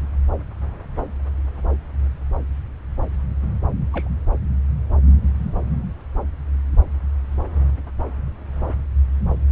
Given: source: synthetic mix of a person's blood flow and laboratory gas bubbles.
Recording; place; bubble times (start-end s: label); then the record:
Doppler ultrasound of blood flow; subclavian vein
3.92-4.09 s: bubbles
From the record:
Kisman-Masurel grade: 111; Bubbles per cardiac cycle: 1 to 2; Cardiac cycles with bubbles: 1 to 10%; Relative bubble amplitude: barely perceptible (0.100 to 0.250); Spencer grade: 1 (occasional bubble signal discernible with the cardiac motion signal, with majority of cardiac periods free of bubbles); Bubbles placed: anywhere in the cardiac cycle